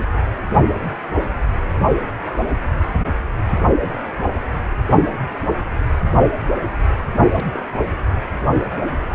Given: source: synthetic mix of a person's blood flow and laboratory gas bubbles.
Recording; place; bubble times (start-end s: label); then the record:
Doppler ultrasound of blood flow; precordium
7.34-7.67 s: bubbles
From the record:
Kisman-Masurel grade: 111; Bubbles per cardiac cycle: 1 to 2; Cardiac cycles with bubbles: 1 to 10%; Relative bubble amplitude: barely perceptible (0.100 to 0.250); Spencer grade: 1 (occasional bubble signal discernible with the cardiac motion signal, with majority of cardiac periods free of bubbles); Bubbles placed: only in the low amplitude regions of the cardiac cycle